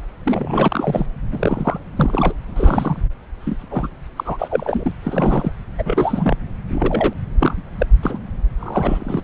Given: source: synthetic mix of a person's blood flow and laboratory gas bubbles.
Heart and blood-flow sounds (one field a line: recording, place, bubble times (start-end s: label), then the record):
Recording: Doppler ultrasound of blood flow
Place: subclavian vein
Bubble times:
0.24-1.06 s: bubbles
1.31-1.79 s: bubbles
1.95-2.33 s: bubbles
2.56-3.03 s: bubbles
3.46-3.57 s: bubbles
3.62-3.90 s: bubbles
3.92-3.98 s: bubbles
4.16-4.92 s: bubbles
5.03-5.52 s: bubbles
5.78-6.36 s: bubbles
6.69-7.13 s: bubbles
7.39-7.62 s: bubbles
7.78-7.86 s: bubbles
8.03-8.18 s: bubbles
8.59-9.22 s: bubbles
From the record:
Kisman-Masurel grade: 242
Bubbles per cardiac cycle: several, 3 to 8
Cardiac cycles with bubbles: 100%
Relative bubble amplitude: moderate (0.250 to 0.450)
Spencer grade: 3 (all of the cardiac periods contain showers or single bubble signals, but not dominating or overriding the cardiac motion signals)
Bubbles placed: anywhere in the cardiac cycle